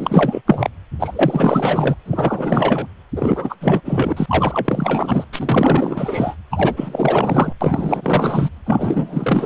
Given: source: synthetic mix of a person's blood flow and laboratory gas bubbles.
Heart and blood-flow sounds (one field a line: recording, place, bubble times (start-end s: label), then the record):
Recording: Doppler ultrasound of blood flow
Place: precordium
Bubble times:
0.00-0.42 s: bubbles
0.47-0.69 s: bubbles
0.99-1.96 s: bubbles
2.05-2.88 s: bubbles
3.15-3.56 s: bubbles
3.60-3.81 s: bubbles
3.85-5.25 s: bubbles
5.33-6.35 s: bubbles
6.50-7.53 s: bubbles
7.61-8.49 s: bubbles
8.66-9.46 s: bubbles
From the record:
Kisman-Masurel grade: 444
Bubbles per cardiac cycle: continuous sound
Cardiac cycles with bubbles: 100%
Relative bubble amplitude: maximal (0.775 to 0.999)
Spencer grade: 4 (maximum detectable bubble signal sounding continuously throughout systole and diastole of every cardiac period, and overriding the amplitude of the normal cardiac signals)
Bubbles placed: anywhere in the cardiac cycle